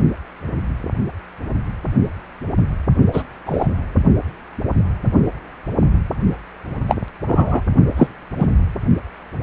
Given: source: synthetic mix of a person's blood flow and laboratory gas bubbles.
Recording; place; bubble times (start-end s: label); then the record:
Doppler ultrasound of blood flow; precordium
3.12-3.23 s: bubbles
3.46-3.67 s: bubbles
6.87-6.96 s: bubbles
7.27-7.62 s: bubbles
7.96-8.08 s: bubbles
8.40-8.47 s: bubbles
From the record:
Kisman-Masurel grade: 123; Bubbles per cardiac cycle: 1 to 2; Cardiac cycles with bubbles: 10 to 50%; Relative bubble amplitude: loud (0.450 to 0.775); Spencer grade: 2 (many but less than half of the cardiac periods contain bubble signals, singularly or in groups); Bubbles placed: only in the low amplitude regions of the cardiac cycle